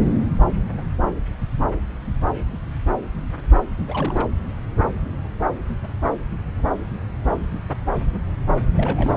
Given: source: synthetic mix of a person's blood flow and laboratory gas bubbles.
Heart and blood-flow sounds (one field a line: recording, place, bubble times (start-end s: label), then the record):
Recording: Doppler ultrasound of blood flow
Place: subclavian vein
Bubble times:
3.87-4.28 s: bubbles
8.75-9.17 s: bubbles
From the record:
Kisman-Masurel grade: 221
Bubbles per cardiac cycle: several, 3 to 8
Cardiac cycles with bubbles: 10 to 50%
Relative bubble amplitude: barely perceptible (0.100 to 0.250)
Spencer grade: 2 (many but less than half of the cardiac periods contain bubble signals, singularly or in groups)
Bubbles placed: anywhere in the cardiac cycle